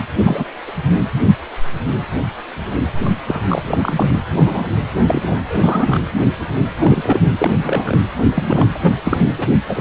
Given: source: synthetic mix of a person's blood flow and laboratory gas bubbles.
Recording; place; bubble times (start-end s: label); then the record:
Doppler ultrasound of blood flow; precordium
0.20-0.44 s: bubbles
0.67-0.72 s: bubbles
2.95-3.13 s: bubbles
3.27-3.46 s: bubbles
3.48-4.17 s: bubbles
4.33-4.71 s: bubbles
4.96-5.21 s: bubbles
5.27-5.38 s: bubbles
5.49-6.00 s: bubbles
6.79-7.20 s: bubbles
7.38-7.58 s: bubbles
7.62-7.98 s: bubbles
8.25-8.67 s: bubbles
8.74-8.79 s: bubbles
8.82-8.94 s: bubbles
9.05-9.18 s: bubbles
9.38-9.47 s: bubbles
9.67-9.81 s: bubbles
From the record:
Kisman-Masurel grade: 232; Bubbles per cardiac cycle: several, 3 to 8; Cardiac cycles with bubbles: 50 to 99%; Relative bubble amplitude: moderate (0.250 to 0.450); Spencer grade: 3 (all of the cardiac periods contain showers or single bubble signals, but not dominating or overriding the cardiac motion signals); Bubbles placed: anywhere in the cardiac cycle